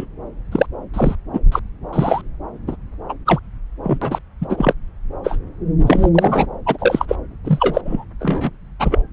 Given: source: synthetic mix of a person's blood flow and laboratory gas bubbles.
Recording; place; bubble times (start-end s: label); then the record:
Doppler ultrasound of blood flow; subclavian vein
0.00-0.06 s: bubbles
0.52-0.66 s: bubbles
0.94-1.15 s: bubbles
1.33-1.40 s: bubbles
1.52-1.59 s: bubbles
1.93-2.21 s: bubbles
2.67-2.76 s: bubbles
3.08-3.15 s: bubbles
3.26-3.40 s: bubbles
3.83-3.98 s: bubbles
4.01-4.18 s: bubbles
4.41-4.73 s: bubbles
5.23-5.38 s: bubbles
5.86-6.09 s: bubbles
6.14-6.46 s: bubbles
6.66-7.05 s: bubbles
7.08-7.16 s: bubbles
7.44-7.81 s: bubbles
7.85-8.04 s: bubbles
8.20-8.50 s: bubbles
8.79-9.02 s: bubbles
From the record:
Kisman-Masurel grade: 243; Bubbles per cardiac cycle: several, 3 to 8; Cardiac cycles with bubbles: 100%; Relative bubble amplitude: loud (0.450 to 0.775); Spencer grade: 3 (all of the cardiac periods contain showers or single bubble signals, but not dominating or overriding the cardiac motion signals); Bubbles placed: anywhere in the cardiac cycle